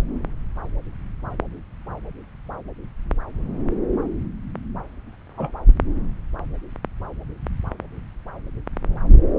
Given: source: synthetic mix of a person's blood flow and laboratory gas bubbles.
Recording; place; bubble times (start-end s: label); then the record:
Doppler ultrasound of blood flow; subclavian vein
5.37-5.51 s: bubbles
From the record:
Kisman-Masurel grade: 112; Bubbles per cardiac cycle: 1 to 2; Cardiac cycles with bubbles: 1 to 10%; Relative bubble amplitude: moderate (0.250 to 0.450); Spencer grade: 1 (occasional bubble signal discernible with the cardiac motion signal, with majority of cardiac periods free of bubbles); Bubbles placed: anywhere in the cardiac cycle